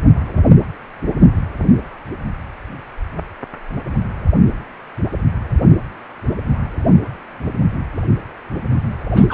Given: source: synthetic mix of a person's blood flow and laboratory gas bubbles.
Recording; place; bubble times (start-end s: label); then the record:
Doppler ultrasound of blood flow; precordium
9.13-9.34 s: bubbles
From the record:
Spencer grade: 1 (occasional bubble signal discernible with the cardiac motion signal, with majority of cardiac periods free of bubbles); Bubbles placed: anywhere in the cardiac cycle